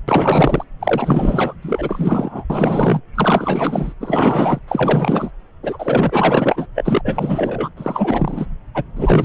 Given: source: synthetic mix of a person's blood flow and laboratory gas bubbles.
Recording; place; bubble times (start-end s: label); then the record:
Doppler ultrasound of blood flow; subclavian vein
0.08-0.65 s: bubbles
0.80-1.54 s: bubbles
1.62-2.44 s: bubbles
2.50-3.00 s: bubbles
3.15-3.94 s: bubbles
4.00-4.59 s: bubbles
4.68-5.31 s: bubbles
5.63-6.68 s: bubbles
6.75-7.01 s: bubbles
7.04-7.69 s: bubbles
7.76-8.46 s: bubbles
8.74-8.85 s: bubbles
8.96-9.25 s: bubbles
From the record:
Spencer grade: 4 (maximum detectable bubble signal sounding continuously throughout systole and diastole of every cardiac period, and overriding the amplitude of the normal cardiac signals); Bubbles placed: anywhere in the cardiac cycle